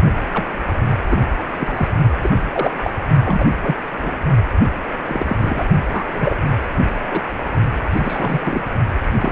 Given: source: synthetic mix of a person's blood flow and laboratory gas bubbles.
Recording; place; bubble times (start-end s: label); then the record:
Doppler ultrasound of blood flow; precordium
0.33-0.45 s: bubbles
1.10-1.18 s: bubbles
1.59-1.88 s: bubbles
2.23-2.40 s: bubbles
2.52-2.77 s: bubbles
2.83-2.90 s: bubbles
3.24-3.45 s: bubbles
3.61-3.75 s: bubbles
4.03-4.17 s: bubbles
5.05-5.37 s: bubbles
5.41-5.64 s: bubbles
5.92-6.04 s: bubbles
6.12-6.34 s: bubbles
6.62-6.67 s: bubbles
7.04-7.21 s: bubbles
7.24-7.29 s: bubbles
7.92-8.39 s: bubbles
8.45-8.64 s: bubbles
9.20-9.31 s: bubbles
From the record:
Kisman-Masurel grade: 242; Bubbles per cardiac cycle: several, 3 to 8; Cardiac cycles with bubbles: 100%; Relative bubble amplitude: moderate (0.250 to 0.450); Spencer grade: 3 (all of the cardiac periods contain showers or single bubble signals, but not dominating or overriding the cardiac motion signals); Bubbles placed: only in the low amplitude regions of the cardiac cycle